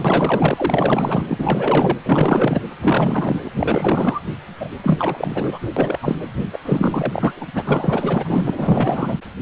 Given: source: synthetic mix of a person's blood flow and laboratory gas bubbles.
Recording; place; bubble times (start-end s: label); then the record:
Doppler ultrasound of blood flow; precordium
0.00-1.99 s: bubbles
2.04-2.62 s: bubbles
2.81-3.41 s: bubbles
3.44-3.51 s: bubbles
3.58-4.21 s: bubbles
4.60-4.71 s: bubbles
4.83-5.58 s: bubbles
5.76-5.98 s: bubbles
6.02-6.16 s: bubbles
6.53-6.58 s: bubbles
6.65-7.33 s: bubbles
7.40-7.47 s: bubbles
7.54-8.51 s: bubbles
8.55-9.18 s: bubbles
From the record:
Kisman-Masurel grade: 444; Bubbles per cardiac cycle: continuous sound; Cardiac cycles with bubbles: 100%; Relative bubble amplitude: maximal (0.775 to 0.999); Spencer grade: 4 (maximum detectable bubble signal sounding continuously throughout systole and diastole of every cardiac period, and overriding the amplitude of the normal cardiac signals); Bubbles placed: anywhere in the cardiac cycle